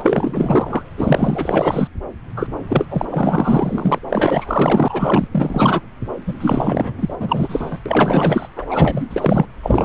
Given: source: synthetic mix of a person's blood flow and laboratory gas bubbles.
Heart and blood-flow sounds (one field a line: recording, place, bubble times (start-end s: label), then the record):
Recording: Doppler ultrasound of blood flow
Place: subclavian vein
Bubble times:
0.00-0.84 s: bubbles
0.97-1.88 s: bubbles
2.36-2.47 s: bubbles
2.69-2.86 s: bubbles
2.90-3.05 s: bubbles
3.09-3.99 s: bubbles
4.08-5.28 s: bubbles
5.32-5.81 s: bubbles
6.26-6.35 s: bubbles
6.40-7.16 s: bubbles
7.20-7.79 s: bubbles
7.86-8.48 s: bubbles
8.56-8.66 s: bubbles
8.69-9.46 s: bubbles
9.62-9.85 s: bubbles
From the record:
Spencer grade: 4 (maximum detectable bubble signal sounding continuously throughout systole and diastole of every cardiac period, and overriding the amplitude of the normal cardiac signals)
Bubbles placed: anywhere in the cardiac cycle